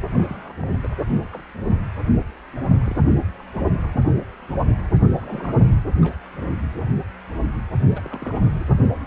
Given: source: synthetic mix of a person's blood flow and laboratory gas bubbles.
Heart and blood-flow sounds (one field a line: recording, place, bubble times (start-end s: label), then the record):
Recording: Doppler ultrasound of blood flow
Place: precordium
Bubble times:
0.10-0.53 s: bubbles
0.60-0.78 s: bubbles
0.82-0.89 s: bubbles
1.09-1.29 s: bubbles
1.32-1.42 s: bubbles
2.85-2.96 s: bubbles
3.40-3.43 s: bubbles
3.54-3.68 s: bubbles
5.13-5.54 s: bubbles
5.59-5.77 s: bubbles
5.91-6.17 s: bubbles
7.95-8.41 s: bubbles
8.45-8.65 s: bubbles
From the record:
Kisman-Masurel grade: 221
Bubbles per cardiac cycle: several, 3 to 8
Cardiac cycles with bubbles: 10 to 50%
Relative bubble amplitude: barely perceptible (0.100 to 0.250)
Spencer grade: 2 (many but less than half of the cardiac periods contain bubble signals, singularly or in groups)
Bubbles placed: only in the low amplitude regions of the cardiac cycle